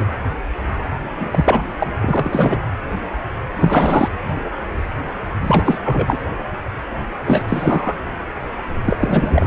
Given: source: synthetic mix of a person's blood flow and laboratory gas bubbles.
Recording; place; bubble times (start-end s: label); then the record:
Doppler ultrasound of blood flow; precordium
0.00-0.06 s: bubbles
1.20-1.66 s: bubbles
1.80-1.92 s: bubbles
2.02-2.58 s: bubbles
3.59-4.08 s: bubbles
5.40-5.78 s: bubbles
5.85-6.19 s: bubbles
7.25-7.42 s: bubbles
7.48-7.95 s: bubbles
8.84-8.96 s: bubbles
8.99-9.47 s: bubbles
From the record:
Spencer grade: 3 (all of the cardiac periods contain showers or single bubble signals, but not dominating or overriding the cardiac motion signals); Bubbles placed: anywhere in the cardiac cycle